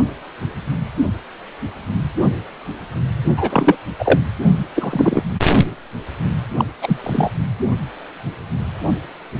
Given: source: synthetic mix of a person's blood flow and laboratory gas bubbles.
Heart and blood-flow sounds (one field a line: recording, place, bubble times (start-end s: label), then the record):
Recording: Doppler ultrasound of blood flow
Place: precordium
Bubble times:
3.37-3.75 s: bubbles
3.99-4.20 s: bubbles
4.75-5.23 s: bubbles
6.58-6.65 s: bubbles
6.82-7.01 s: bubbles
7.04-7.30 s: bubbles
From the record:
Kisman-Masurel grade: 233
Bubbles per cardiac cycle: several, 3 to 8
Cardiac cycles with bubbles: 50 to 99%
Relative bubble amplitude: loud (0.450 to 0.775)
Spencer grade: 3 (all of the cardiac periods contain showers or single bubble signals, but not dominating or overriding the cardiac motion signals)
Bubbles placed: only in the low amplitude regions of the cardiac cycle